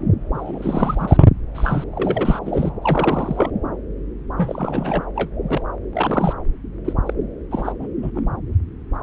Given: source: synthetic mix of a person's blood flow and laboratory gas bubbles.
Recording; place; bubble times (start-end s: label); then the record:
Doppler ultrasound of blood flow; subclavian vein
0.34-1.26 s: bubbles
1.55-1.84 s: bubbles
1.91-2.39 s: bubbles
2.45-2.73 s: bubbles
2.82-3.50 s: bubbles
4.37-5.04 s: bubbles
5.15-5.31 s: bubbles
5.47-5.62 s: bubbles
5.93-6.33 s: bubbles
6.85-6.93 s: bubbles
7.06-7.14 s: bubbles
7.51-7.73 s: bubbles
7.79-7.88 s: bubbles
8.02-8.10 s: bubbles
8.14-8.21 s: bubbles
From the record:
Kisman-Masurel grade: 332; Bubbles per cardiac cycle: rolling drumbeat, 9 or more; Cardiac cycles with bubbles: 50 to 99%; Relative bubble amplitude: moderate (0.250 to 0.450); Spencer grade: 3 (all of the cardiac periods contain showers or single bubble signals, but not dominating or overriding the cardiac motion signals); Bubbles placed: anywhere in the cardiac cycle